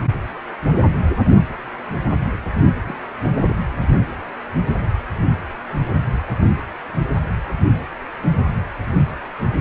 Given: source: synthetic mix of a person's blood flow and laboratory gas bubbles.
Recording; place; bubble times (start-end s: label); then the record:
Doppler ultrasound of blood flow; precordium
2.85-2.94 s: bubbles
3.48-3.54 s: bubbles
3.80-3.89 s: bubbles
From the record:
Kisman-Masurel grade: 121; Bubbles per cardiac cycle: 1 to 2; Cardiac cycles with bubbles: 10 to 50%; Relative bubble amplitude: barely perceptible (0.100 to 0.250); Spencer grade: 2 (many but less than half of the cardiac periods contain bubble signals, singularly or in groups); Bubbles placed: anywhere in the cardiac cycle